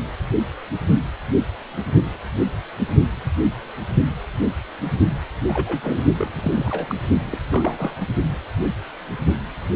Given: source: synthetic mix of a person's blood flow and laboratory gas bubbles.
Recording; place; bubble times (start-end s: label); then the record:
Doppler ultrasound of blood flow; precordium
5.48-6.04 s: bubbles
6.18-6.95 s: bubbles
7.26-7.39 s: bubbles
7.51-7.96 s: bubbles
From the record:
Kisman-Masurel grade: 221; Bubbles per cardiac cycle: several, 3 to 8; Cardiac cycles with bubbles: 10 to 50%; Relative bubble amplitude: barely perceptible (0.100 to 0.250); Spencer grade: 2 (many but less than half of the cardiac periods contain bubble signals, singularly or in groups); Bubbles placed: only in the low amplitude regions of the cardiac cycle